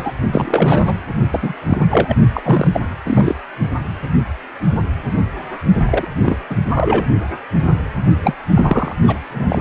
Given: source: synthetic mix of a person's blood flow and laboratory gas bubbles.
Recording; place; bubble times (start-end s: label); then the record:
Doppler ultrasound of blood flow; precordium
0.00-0.11 s: bubbles
0.31-0.98 s: bubbles
1.30-1.40 s: bubbles
1.42-1.53 s: bubbles
1.68-1.86 s: bubbles
1.89-2.15 s: bubbles
2.34-2.80 s: bubbles
3.05-3.34 s: bubbles
5.86-6.08 s: bubbles
6.22-6.37 s: bubbles
6.50-6.57 s: bubbles
6.73-7.05 s: bubbles
8.22-8.34 s: bubbles
8.55-8.94 s: bubbles
9.07-9.18 s: bubbles
9.29-9.59 s: bubbles
From the record:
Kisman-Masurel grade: 233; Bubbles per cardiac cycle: several, 3 to 8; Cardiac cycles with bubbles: 50 to 99%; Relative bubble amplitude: loud (0.450 to 0.775); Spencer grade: 3 (all of the cardiac periods contain showers or single bubble signals, but not dominating or overriding the cardiac motion signals); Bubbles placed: only in the low amplitude regions of the cardiac cycle